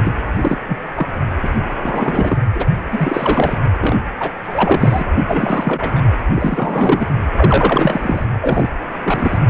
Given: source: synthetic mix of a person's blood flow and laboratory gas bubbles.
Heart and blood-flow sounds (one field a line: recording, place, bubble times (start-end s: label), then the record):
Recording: Doppler ultrasound of blood flow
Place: precordium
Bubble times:
0.05-0.13 s: bubbles
0.27-0.58 s: bubbles
0.67-0.78 s: bubbles
0.96-1.08 s: bubbles
1.43-1.49 s: bubbles
1.83-2.38 s: bubbles
2.54-2.65 s: bubbles
2.92-3.59 s: bubbles
3.81-3.99 s: bubbles
4.19-4.31 s: bubbles
4.43-5.04 s: bubbles
5.27-6.03 s: bubbles
6.35-7.08 s: bubbles
7.34-8.25 s: bubbles
8.41-8.70 s: bubbles
9.04-9.38 s: bubbles
From the record:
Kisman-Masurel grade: 243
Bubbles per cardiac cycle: several, 3 to 8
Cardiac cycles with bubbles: 100%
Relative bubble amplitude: loud (0.450 to 0.775)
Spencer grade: 3 (all of the cardiac periods contain showers or single bubble signals, but not dominating or overriding the cardiac motion signals)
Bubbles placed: anywhere in the cardiac cycle